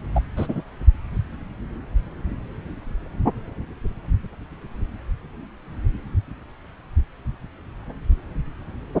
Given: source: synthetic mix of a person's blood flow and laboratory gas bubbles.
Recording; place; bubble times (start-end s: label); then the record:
Doppler ultrasound of blood flow; subclavian vein
0.15-0.21 s: bubbles
0.36-0.61 s: bubbles
From the record:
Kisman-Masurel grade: 213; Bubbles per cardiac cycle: several, 3 to 8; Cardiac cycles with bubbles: 1 to 10%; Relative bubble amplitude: loud (0.450 to 0.775); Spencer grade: 1 (occasional bubble signal discernible with the cardiac motion signal, with majority of cardiac periods free of bubbles); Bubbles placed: anywhere in the cardiac cycle